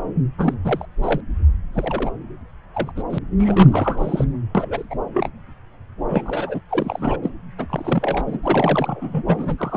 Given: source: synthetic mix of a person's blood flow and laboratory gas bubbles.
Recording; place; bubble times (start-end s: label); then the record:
Doppler ultrasound of blood flow; subclavian vein
0.38-0.54 s: bubbles
0.64-0.85 s: bubbles
1.02-1.21 s: bubbles
1.73-2.11 s: bubbles
2.74-2.92 s: bubbles
2.96-3.03 s: bubbles
3.10-3.19 s: bubbles
3.38-4.25 s: bubbles
4.54-4.87 s: bubbles
4.90-4.95 s: bubbles
5.14-5.30 s: bubbles
6.08-6.60 s: bubbles
6.69-7.17 s: bubbles
7.22-7.30 s: bubbles
7.58-8.38 s: bubbles
8.43-9.24 s: bubbles
9.27-9.77 s: bubbles
From the record:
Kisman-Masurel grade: 342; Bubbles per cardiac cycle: rolling drumbeat, 9 or more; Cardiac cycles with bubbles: 100%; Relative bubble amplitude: moderate (0.250 to 0.450); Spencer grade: 3 (all of the cardiac periods contain showers or single bubble signals, but not dominating or overriding the cardiac motion signals); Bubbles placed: anywhere in the cardiac cycle